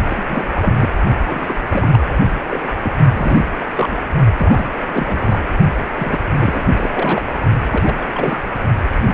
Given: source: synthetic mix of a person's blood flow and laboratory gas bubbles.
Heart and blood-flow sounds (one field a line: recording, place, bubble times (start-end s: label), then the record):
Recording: Doppler ultrasound of blood flow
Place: precordium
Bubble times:
0.09-0.73 s: bubbles
0.78-0.89 s: bubbles
1.19-1.60 s: bubbles
1.70-1.99 s: bubbles
2.07-2.19 s: bubbles
2.50-2.67 s: bubbles
2.82-2.92 s: bubbles
3.13-3.48 s: bubbles
3.59-3.65 s: bubbles
3.74-3.96 s: bubbles
4.38-4.69 s: bubbles
4.87-5.38 s: bubbles
5.97-6.19 s: bubbles
6.39-6.65 s: bubbles
6.76-7.38 s: bubbles
7.72-8.07 s: bubbles
8.14-8.39 s: bubbles
9.06-9.14 s: bubbles
From the record:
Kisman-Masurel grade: 342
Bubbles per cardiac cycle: rolling drumbeat, 9 or more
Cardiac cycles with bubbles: 100%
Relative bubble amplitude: moderate (0.250 to 0.450)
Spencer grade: 3 (all of the cardiac periods contain showers or single bubble signals, but not dominating or overriding the cardiac motion signals)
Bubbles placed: only in the low amplitude regions of the cardiac cycle